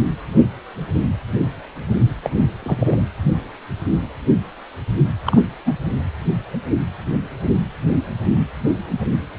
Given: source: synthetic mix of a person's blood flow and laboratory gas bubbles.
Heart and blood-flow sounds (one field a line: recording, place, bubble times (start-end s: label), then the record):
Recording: Doppler ultrasound of blood flow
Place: precordium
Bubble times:
2.22-2.30 s: bubbles
2.62-3.02 s: bubbles
5.26-5.44 s: bubbles
5.66-5.76 s: bubbles
From the record:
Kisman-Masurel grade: 222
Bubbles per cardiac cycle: several, 3 to 8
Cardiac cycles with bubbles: 10 to 50%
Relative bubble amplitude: moderate (0.250 to 0.450)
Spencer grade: 2 (many but less than half of the cardiac periods contain bubble signals, singularly or in groups)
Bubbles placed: anywhere in the cardiac cycle